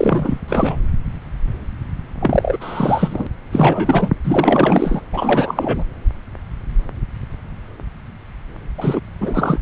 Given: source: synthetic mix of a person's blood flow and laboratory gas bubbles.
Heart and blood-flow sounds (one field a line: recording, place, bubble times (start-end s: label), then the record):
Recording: Doppler ultrasound of blood flow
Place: subclavian vein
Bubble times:
0.00-0.40 s: bubbles
0.48-0.77 s: bubbles
2.20-2.58 s: bubbles
2.60-3.27 s: bubbles
3.52-4.09 s: bubbles
4.24-5.01 s: bubbles
5.12-5.84 s: bubbles
8.77-9.00 s: bubbles
9.21-9.59 s: bubbles
From the record:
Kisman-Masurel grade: 333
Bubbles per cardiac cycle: rolling drumbeat, 9 or more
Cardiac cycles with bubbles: 50 to 99%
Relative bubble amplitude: loud (0.450 to 0.775)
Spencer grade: 3 (all of the cardiac periods contain showers or single bubble signals, but not dominating or overriding the cardiac motion signals)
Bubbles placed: anywhere in the cardiac cycle